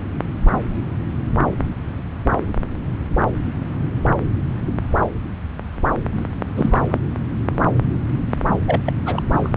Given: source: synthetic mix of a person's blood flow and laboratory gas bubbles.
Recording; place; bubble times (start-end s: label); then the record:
Doppler ultrasound of blood flow; subclavian vein
6.16-6.28 s: bubbles
6.56-6.82 s: bubbles
6.90-6.98 s: bubbles
8.67-8.82 s: bubbles
8.86-8.93 s: bubbles
9.05-9.22 s: bubbles
9.36-9.51 s: bubbles
From the record:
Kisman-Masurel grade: 222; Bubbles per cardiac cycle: several, 3 to 8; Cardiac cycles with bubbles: 10 to 50%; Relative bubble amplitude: moderate (0.250 to 0.450); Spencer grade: 2 (many but less than half of the cardiac periods contain bubble signals, singularly or in groups); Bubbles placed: anywhere in the cardiac cycle